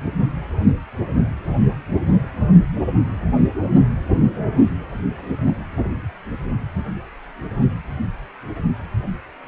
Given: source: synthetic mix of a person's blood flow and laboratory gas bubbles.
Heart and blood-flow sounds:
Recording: Doppler ultrasound of blood flow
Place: precordium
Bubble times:
5.18-5.65 s: bubbles
From the record:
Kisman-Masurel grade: 122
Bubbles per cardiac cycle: 1 to 2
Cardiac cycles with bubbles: 10 to 50%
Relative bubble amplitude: moderate (0.250 to 0.450)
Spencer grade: 2 (many but less than half of the cardiac periods contain bubble signals, singularly or in groups)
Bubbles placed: anywhere in the cardiac cycle

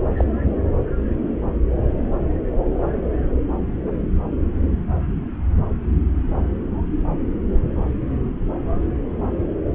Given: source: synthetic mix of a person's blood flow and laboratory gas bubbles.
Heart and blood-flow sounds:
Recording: Doppler ultrasound of blood flow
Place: subclavian vein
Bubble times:
0.17-0.24 s: bubbles
From the record:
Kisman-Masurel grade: 111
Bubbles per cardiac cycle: 1 to 2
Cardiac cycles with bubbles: 1 to 10%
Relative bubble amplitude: barely perceptible (0.100 to 0.250)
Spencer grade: 1 (occasional bubble signal discernible with the cardiac motion signal, with majority of cardiac periods free of bubbles)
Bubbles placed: anywhere in the cardiac cycle

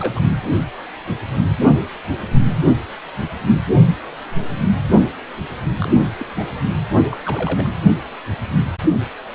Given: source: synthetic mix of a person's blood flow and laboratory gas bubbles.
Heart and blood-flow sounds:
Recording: Doppler ultrasound of blood flow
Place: precordium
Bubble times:
0.00-0.23 s: bubbles
5.80-5.95 s: bubbles
6.19-6.26 s: bubbles
6.36-6.50 s: bubbles
6.95-7.02 s: bubbles
7.09-7.17 s: bubbles
7.25-7.70 s: bubbles
From the record:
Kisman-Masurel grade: 221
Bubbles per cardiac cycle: several, 3 to 8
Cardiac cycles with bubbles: 10 to 50%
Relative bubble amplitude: barely perceptible (0.100 to 0.250)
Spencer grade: 2 (many but less than half of the cardiac periods contain bubble signals, singularly or in groups)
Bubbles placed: only in the low amplitude regions of the cardiac cycle

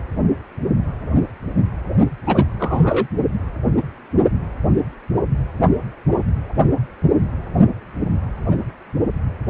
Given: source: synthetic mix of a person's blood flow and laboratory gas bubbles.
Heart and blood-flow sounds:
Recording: Doppler ultrasound of blood flow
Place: precordium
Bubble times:
2.26-2.46 s: bubbles
2.59-3.07 s: bubbles
From the record:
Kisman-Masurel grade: 213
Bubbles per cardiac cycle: several, 3 to 8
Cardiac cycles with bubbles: 1 to 10%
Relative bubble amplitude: loud (0.450 to 0.775)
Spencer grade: 1 (occasional bubble signal discernible with the cardiac motion signal, with majority of cardiac periods free of bubbles)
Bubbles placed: only in the low amplitude regions of the cardiac cycle

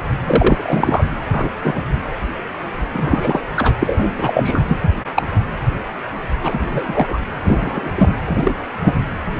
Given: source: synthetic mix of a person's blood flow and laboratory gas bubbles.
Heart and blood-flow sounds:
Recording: Doppler ultrasound of blood flow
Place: precordium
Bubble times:
0.27-1.04 s: bubbles
1.32-1.49 s: bubbles
1.64-1.82 s: bubbles
2.93-3.40 s: bubbles
3.56-3.73 s: bubbles
3.79-4.12 s: bubbles
4.17-4.62 s: bubbles
4.68-4.77 s: bubbles
4.83-4.89 s: bubbles
5.16-5.29 s: bubbles
6.43-7.20 s: bubbles
7.44-7.91 s: bubbles
7.96-8.14 s: bubbles
8.26-8.54 s: bubbles
8.82-9.03 s: bubbles
From the record:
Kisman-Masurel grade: 233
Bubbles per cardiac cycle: several, 3 to 8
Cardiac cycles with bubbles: 50 to 99%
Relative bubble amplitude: loud (0.450 to 0.775)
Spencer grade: 3 (all of the cardiac periods contain showers or single bubble signals, but not dominating or overriding the cardiac motion signals)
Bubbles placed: anywhere in the cardiac cycle

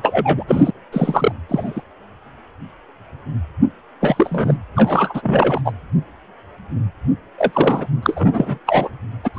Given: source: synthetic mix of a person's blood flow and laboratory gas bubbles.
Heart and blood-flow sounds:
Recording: Doppler ultrasound of blood flow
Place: precordium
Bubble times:
0.02-0.43 s: bubbles
0.48-0.70 s: bubbles
0.92-1.32 s: bubbles
1.48-1.81 s: bubbles
4.00-4.57 s: bubbles
4.75-5.61 s: bubbles
5.64-5.72 s: bubbles
7.38-7.87 s: bubbles
8.03-8.58 s: bubbles
8.66-8.90 s: bubbles
9.23-9.29 s: bubbles
9.33-9.39 s: bubbles
From the record:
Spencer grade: 3 (all of the cardiac periods contain showers or single bubble signals, but not dominating or overriding the cardiac motion signals)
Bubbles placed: anywhere in the cardiac cycle

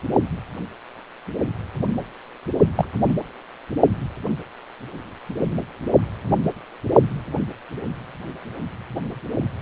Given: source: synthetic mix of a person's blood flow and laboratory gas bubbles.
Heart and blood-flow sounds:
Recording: Doppler ultrasound of blood flow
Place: precordium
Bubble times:
2.75-2.85 s: bubbles
3.08-3.13 s: bubbles
From the record:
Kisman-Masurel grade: 122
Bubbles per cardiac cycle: 1 to 2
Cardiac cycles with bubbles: 10 to 50%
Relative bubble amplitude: moderate (0.250 to 0.450)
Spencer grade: 2 (many but less than half of the cardiac periods contain bubble signals, singularly or in groups)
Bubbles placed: only in the low amplitude regions of the cardiac cycle

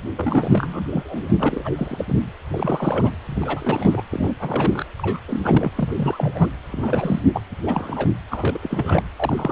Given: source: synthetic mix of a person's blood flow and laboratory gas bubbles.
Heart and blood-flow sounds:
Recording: Doppler ultrasound of blood flow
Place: precordium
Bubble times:
0.16-1.32 s: bubbles
1.38-1.71 s: bubbles
1.76-2.04 s: bubbles
2.08-2.15 s: bubbles
2.54-3.10 s: bubbles
3.25-4.03 s: bubbles
4.09-4.34 s: bubbles
4.40-4.85 s: bubbles
4.98-5.20 s: bubbles
5.28-5.70 s: bubbles
5.75-6.51 s: bubbles
6.72-7.22 s: bubbles
7.33-7.41 s: bubbles
7.63-8.11 s: bubbles
8.31-8.59 s: bubbles
8.62-9.03 s: bubbles
9.16-9.52 s: bubbles
From the record:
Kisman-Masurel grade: 332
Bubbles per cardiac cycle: rolling drumbeat, 9 or more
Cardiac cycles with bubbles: 50 to 99%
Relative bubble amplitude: moderate (0.250 to 0.450)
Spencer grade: 3 (all of the cardiac periods contain showers or single bubble signals, but not dominating or overriding the cardiac motion signals)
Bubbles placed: anywhere in the cardiac cycle

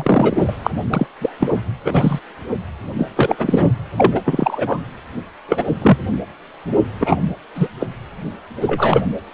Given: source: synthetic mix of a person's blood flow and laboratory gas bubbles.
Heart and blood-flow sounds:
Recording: Doppler ultrasound of blood flow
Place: precordium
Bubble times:
0.00-0.54 s: bubbles
0.63-0.70 s: bubbles
0.93-1.06 s: bubbles
1.21-1.29 s: bubbles
1.40-1.48 s: bubbles
1.84-2.19 s: bubbles
2.98-3.08 s: bubbles
3.16-3.72 s: bubbles
3.96-4.21 s: bubbles
4.25-4.80 s: bubbles
5.48-5.64 s: bubbles
5.81-5.97 s: bubbles
7.00-7.17 s: bubbles
7.54-7.67 s: bubbles
7.80-7.86 s: bubbles
8.61-9.02 s: bubbles
From the record:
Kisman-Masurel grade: 243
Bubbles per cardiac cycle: several, 3 to 8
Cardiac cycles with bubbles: 100%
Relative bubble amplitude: loud (0.450 to 0.775)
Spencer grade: 3 (all of the cardiac periods contain showers or single bubble signals, but not dominating or overriding the cardiac motion signals)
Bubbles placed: anywhere in the cardiac cycle

